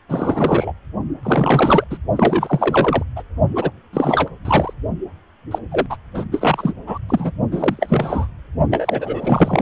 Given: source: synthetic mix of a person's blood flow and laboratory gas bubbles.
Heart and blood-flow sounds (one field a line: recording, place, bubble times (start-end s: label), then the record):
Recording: Doppler ultrasound of blood flow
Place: precordium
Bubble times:
0.08-0.72 s: bubbles
1.23-1.85 s: bubbles
1.90-1.98 s: bubbles
2.15-3.03 s: bubbles
3.16-3.23 s: bubbles
3.55-3.71 s: bubbles
3.93-4.29 s: bubbles
4.45-4.74 s: bubbles
5.51-5.58 s: bubbles
5.71-5.86 s: bubbles
5.90-5.97 s: bubbles
6.15-6.26 s: bubbles
6.32-6.73 s: bubbles
6.87-6.98 s: bubbles
7.08-7.32 s: bubbles
7.52-8.27 s: bubbles
8.70-9.62 s: bubbles
From the record:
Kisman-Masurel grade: 343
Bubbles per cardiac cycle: rolling drumbeat, 9 or more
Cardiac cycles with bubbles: 100%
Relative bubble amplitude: loud (0.450 to 0.775)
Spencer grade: 3 (all of the cardiac periods contain showers or single bubble signals, but not dominating or overriding the cardiac motion signals)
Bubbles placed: only in the low amplitude regions of the cardiac cycle